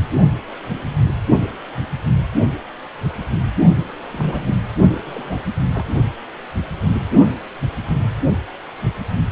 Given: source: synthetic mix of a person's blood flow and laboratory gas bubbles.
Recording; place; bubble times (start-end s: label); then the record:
Doppler ultrasound of blood flow; precordium
4.12-4.54 s: bubbles
4.92-5.02 s: bubbles
5.05-5.42 s: bubbles
5.46-5.53 s: bubbles
5.74-5.84 s: bubbles
From the record:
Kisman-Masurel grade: 221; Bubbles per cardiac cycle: several, 3 to 8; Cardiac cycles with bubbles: 10 to 50%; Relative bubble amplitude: barely perceptible (0.100 to 0.250); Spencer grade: 2 (many but less than half of the cardiac periods contain bubble signals, singularly or in groups); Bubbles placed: only in the low amplitude regions of the cardiac cycle